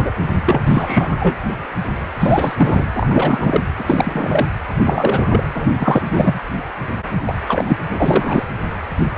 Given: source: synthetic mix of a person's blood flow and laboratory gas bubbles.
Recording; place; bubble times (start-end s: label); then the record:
Doppler ultrasound of blood flow; precordium
0.00-0.11 s: bubbles
0.45-0.62 s: bubbles
0.65-1.37 s: bubbles
2.19-2.85 s: bubbles
2.94-3.60 s: bubbles
3.78-4.46 s: bubbles
4.85-5.44 s: bubbles
5.54-5.67 s: bubbles
5.73-6.40 s: bubbles
7.25-7.35 s: bubbles
7.48-7.78 s: bubbles
7.89-8.43 s: bubbles
From the record:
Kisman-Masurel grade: 333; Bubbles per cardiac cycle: rolling drumbeat, 9 or more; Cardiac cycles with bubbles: 50 to 99%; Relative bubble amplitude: loud (0.450 to 0.775); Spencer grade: 3 (all of the cardiac periods contain showers or single bubble signals, but not dominating or overriding the cardiac motion signals); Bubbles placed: anywhere in the cardiac cycle